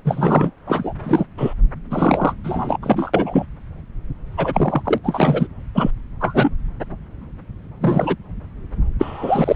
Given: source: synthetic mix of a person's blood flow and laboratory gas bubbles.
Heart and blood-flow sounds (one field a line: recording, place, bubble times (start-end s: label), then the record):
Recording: Doppler ultrasound of blood flow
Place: subclavian vein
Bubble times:
0.05-0.50 s: bubbles
0.67-0.93 s: bubbles
1.03-1.24 s: bubbles
1.37-1.53 s: bubbles
1.90-2.33 s: bubbles
2.44-2.78 s: bubbles
2.82-3.46 s: bubbles
4.37-4.82 s: bubbles
4.85-4.99 s: bubbles
5.04-5.47 s: bubbles
5.75-5.91 s: bubbles
6.20-6.50 s: bubbles
7.81-8.16 s: bubbles
8.99-9.56 s: bubbles
From the record:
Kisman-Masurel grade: 233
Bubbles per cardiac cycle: several, 3 to 8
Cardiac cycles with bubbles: 50 to 99%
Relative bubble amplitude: loud (0.450 to 0.775)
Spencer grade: 3 (all of the cardiac periods contain showers or single bubble signals, but not dominating or overriding the cardiac motion signals)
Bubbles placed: anywhere in the cardiac cycle